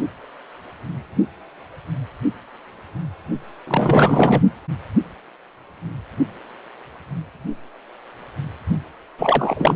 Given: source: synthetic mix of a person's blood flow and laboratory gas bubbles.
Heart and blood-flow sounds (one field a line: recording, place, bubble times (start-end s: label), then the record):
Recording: Doppler ultrasound of blood flow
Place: precordium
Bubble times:
3.67-4.42 s: bubbles
9.18-9.75 s: bubbles
From the record:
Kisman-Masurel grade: 223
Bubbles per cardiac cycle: several, 3 to 8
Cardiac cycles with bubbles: 10 to 50%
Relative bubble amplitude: loud (0.450 to 0.775)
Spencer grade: 2 (many but less than half of the cardiac periods contain bubble signals, singularly or in groups)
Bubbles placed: only in the low amplitude regions of the cardiac cycle